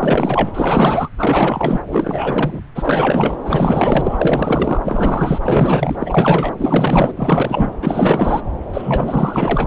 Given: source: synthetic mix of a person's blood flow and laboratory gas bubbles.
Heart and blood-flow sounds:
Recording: Doppler ultrasound of blood flow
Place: subclavian vein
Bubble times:
0.00-0.51 s: bubbles
0.54-1.08 s: bubbles
1.18-1.81 s: bubbles
1.92-2.60 s: bubbles
2.75-3.40 s: bubbles
3.45-4.81 s: bubbles
4.84-5.96 s: bubbles
6.00-6.54 s: bubbles
6.57-7.12 s: bubbles
7.17-7.72 s: bubbles
7.82-8.42 s: bubbles
8.73-9.67 s: bubbles
From the record:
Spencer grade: 4 (maximum detectable bubble signal sounding continuously throughout systole and diastole of every cardiac period, and overriding the amplitude of the normal cardiac signals)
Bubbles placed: anywhere in the cardiac cycle

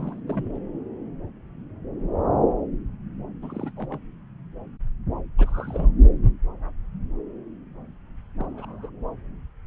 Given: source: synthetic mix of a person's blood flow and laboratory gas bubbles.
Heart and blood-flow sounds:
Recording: Doppler ultrasound of blood flow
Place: subclavian vein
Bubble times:
0.00-0.22 s: bubbles
0.27-0.57 s: bubbles
3.42-3.71 s: bubbles
3.77-3.99 s: bubbles
5.38-5.91 s: bubbles
8.38-8.90 s: bubbles
From the record:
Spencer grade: 2 (many but less than half of the cardiac periods contain bubble signals, singularly or in groups)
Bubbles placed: anywhere in the cardiac cycle

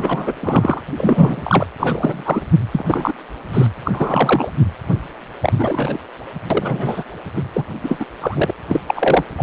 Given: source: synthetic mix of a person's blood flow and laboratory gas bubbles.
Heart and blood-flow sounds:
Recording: Doppler ultrasound of blood flow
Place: precordium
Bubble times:
0.00-0.34 s: bubbles
0.40-0.81 s: bubbles
0.97-1.67 s: bubbles
1.79-2.42 s: bubbles
2.71-2.85 s: bubbles
2.88-3.13 s: bubbles
3.53-3.67 s: bubbles
3.84-4.52 s: bubbles
5.42-5.53 s: bubbles
5.58-5.99 s: bubbles
6.50-7.04 s: bubbles
7.34-7.42 s: bubbles
7.54-7.65 s: bubbles
7.83-8.05 s: bubbles
8.21-8.51 s: bubbles
8.67-8.80 s: bubbles
8.88-9.24 s: bubbles
9.37-9.43 s: bubbles
From the record:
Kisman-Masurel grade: 243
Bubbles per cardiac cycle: several, 3 to 8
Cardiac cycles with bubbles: 100%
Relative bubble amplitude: loud (0.450 to 0.775)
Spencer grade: 3 (all of the cardiac periods contain showers or single bubble signals, but not dominating or overriding the cardiac motion signals)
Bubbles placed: anywhere in the cardiac cycle

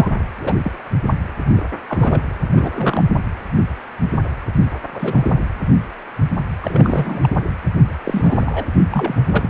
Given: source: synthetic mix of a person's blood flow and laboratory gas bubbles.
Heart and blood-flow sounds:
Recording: Doppler ultrasound of blood flow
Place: precordium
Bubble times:
0.00-0.08 s: bubbles
0.36-0.54 s: bubbles
0.62-0.71 s: bubbles
1.56-1.62 s: bubbles
1.88-2.21 s: bubbles
2.50-3.04 s: bubbles
4.93-5.40 s: bubbles
6.62-7.29 s: bubbles
8.04-8.66 s: bubbles
8.91-9.48 s: bubbles
From the record:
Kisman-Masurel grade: 232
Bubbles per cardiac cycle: several, 3 to 8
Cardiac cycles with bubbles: 50 to 99%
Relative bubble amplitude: moderate (0.250 to 0.450)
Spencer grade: 3 (all of the cardiac periods contain showers or single bubble signals, but not dominating or overriding the cardiac motion signals)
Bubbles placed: anywhere in the cardiac cycle

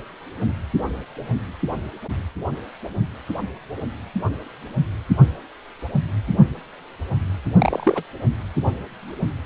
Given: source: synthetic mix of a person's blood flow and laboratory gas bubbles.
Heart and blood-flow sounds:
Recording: Doppler ultrasound of blood flow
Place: precordium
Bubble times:
7.56-8.03 s: bubbles
From the record:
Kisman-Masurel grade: 212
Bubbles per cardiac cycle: several, 3 to 8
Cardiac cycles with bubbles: 1 to 10%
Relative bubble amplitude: moderate (0.250 to 0.450)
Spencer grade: 1 (occasional bubble signal discernible with the cardiac motion signal, with majority of cardiac periods free of bubbles)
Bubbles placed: anywhere in the cardiac cycle

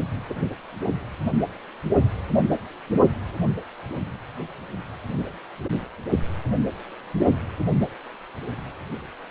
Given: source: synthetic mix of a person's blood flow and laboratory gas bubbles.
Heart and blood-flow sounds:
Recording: Doppler ultrasound of blood flow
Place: precordium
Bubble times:
0.29-0.34 s: bubbles
From the record:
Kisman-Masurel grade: 212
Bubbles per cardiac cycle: several, 3 to 8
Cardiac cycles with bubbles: 1 to 10%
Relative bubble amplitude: moderate (0.250 to 0.450)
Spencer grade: 1 (occasional bubble signal discernible with the cardiac motion signal, with majority of cardiac periods free of bubbles)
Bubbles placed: only in the low amplitude regions of the cardiac cycle

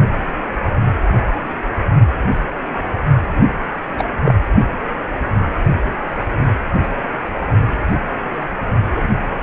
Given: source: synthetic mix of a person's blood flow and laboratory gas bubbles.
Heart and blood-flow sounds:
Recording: Doppler ultrasound of blood flow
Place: precordium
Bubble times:
3.98-4.04 s: bubbles
4.24-4.35 s: bubbles
8.93-9.09 s: bubbles
From the record:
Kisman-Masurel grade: 123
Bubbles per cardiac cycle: 1 to 2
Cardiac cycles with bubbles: 10 to 50%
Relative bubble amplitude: loud (0.450 to 0.775)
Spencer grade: 2 (many but less than half of the cardiac periods contain bubble signals, singularly or in groups)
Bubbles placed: only in the low amplitude regions of the cardiac cycle

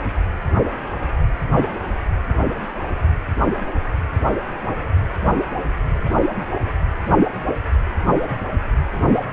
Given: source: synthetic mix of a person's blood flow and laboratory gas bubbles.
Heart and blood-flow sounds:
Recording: Doppler ultrasound of blood flow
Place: precordium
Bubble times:
no bubbles
From the record:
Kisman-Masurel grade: 000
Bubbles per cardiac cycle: 0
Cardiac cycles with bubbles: 0%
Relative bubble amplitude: no bubbles discernible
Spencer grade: 0 (complete lack of bubble signals)

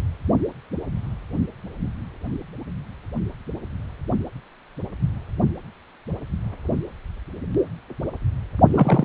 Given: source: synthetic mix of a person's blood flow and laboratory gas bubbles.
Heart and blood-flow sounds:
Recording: Doppler ultrasound of blood flow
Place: precordium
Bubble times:
8.72-9.05 s: bubbles
From the record:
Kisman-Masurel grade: 113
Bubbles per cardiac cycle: 1 to 2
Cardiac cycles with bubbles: 1 to 10%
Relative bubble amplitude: loud (0.450 to 0.775)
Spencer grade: 1 (occasional bubble signal discernible with the cardiac motion signal, with majority of cardiac periods free of bubbles)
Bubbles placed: only in the low amplitude regions of the cardiac cycle

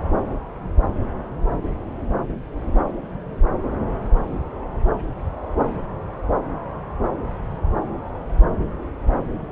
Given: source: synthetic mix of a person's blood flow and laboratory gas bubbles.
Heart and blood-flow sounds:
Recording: Doppler ultrasound of blood flow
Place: subclavian vein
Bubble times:
no bubbles
From the record:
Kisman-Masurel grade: 000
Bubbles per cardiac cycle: 0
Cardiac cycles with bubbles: 0%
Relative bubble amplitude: no bubbles discernible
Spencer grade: 0 (complete lack of bubble signals)

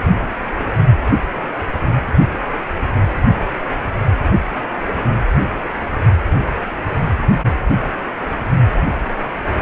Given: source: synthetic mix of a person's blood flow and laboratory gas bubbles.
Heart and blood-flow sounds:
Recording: Doppler ultrasound of blood flow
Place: precordium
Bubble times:
0.58-0.67 s: bubbles
From the record:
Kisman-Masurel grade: 112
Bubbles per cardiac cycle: 1 to 2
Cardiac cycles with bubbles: 1 to 10%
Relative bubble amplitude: moderate (0.250 to 0.450)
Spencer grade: 1 (occasional bubble signal discernible with the cardiac motion signal, with majority of cardiac periods free of bubbles)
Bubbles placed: only in the low amplitude regions of the cardiac cycle

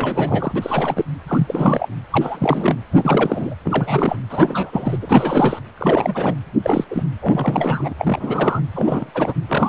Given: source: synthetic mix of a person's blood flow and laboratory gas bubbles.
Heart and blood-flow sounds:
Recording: Doppler ultrasound of blood flow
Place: precordium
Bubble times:
0.00-0.52 s: bubbles
0.55-1.05 s: bubbles
1.27-1.89 s: bubbles
2.10-2.75 s: bubbles
2.92-3.54 s: bubbles
3.65-4.17 s: bubbles
4.29-4.99 s: bubbles
5.01-5.59 s: bubbles
5.78-6.35 s: bubbles
6.62-6.84 s: bubbles
6.91-7.04 s: bubbles
7.21-7.94 s: bubbles
7.98-8.60 s: bubbles
8.76-9.11 s: bubbles
9.14-9.34 s: bubbles
9.48-9.69 s: bubbles
From the record:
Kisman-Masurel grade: 342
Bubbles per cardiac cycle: rolling drumbeat, 9 or more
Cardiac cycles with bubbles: 100%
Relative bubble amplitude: moderate (0.250 to 0.450)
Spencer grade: 3 (all of the cardiac periods contain showers or single bubble signals, but not dominating or overriding the cardiac motion signals)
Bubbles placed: anywhere in the cardiac cycle

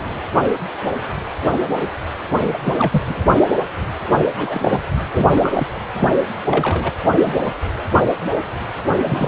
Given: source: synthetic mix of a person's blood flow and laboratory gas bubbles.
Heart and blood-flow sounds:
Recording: Doppler ultrasound of blood flow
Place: precordium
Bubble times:
2.44-2.57 s: bubbles
2.63-3.02 s: bubbles
3.05-3.25 s: bubbles
4.19-4.31 s: bubbles
4.36-4.81 s: bubbles
5.11-5.29 s: bubbles
5.35-5.67 s: bubbles
5.96-6.08 s: bubbles
6.50-6.92 s: bubbles
7.05-7.53 s: bubbles
8.90-9.02 s: bubbles
9.04-9.28 s: bubbles
From the record:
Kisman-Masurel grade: 222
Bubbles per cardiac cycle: several, 3 to 8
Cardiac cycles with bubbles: 10 to 50%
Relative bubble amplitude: moderate (0.250 to 0.450)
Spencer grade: 2 (many but less than half of the cardiac periods contain bubble signals, singularly or in groups)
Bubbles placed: anywhere in the cardiac cycle

